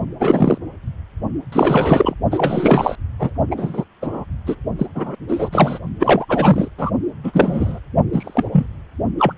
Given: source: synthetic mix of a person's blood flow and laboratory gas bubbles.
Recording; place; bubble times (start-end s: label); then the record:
Doppler ultrasound of blood flow; precordium
0.20-0.58 s: bubbles
1.52-2.14 s: bubbles
2.31-2.96 s: bubbles
3.19-3.30 s: bubbles
3.50-3.84 s: bubbles
4.02-4.25 s: bubbles
4.46-4.56 s: bubbles
4.79-4.87 s: bubbles
4.95-5.16 s: bubbles
5.28-5.50 s: bubbles
5.52-5.79 s: bubbles
6.00-6.25 s: bubbles
6.29-6.68 s: bubbles
6.78-6.91 s: bubbles
7.24-7.79 s: bubbles
8.12-8.66 s: bubbles
9.18-9.33 s: bubbles
From the record:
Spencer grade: 3 (all of the cardiac periods contain showers or single bubble signals, but not dominating or overriding the cardiac motion signals); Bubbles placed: only in the low amplitude regions of the cardiac cycle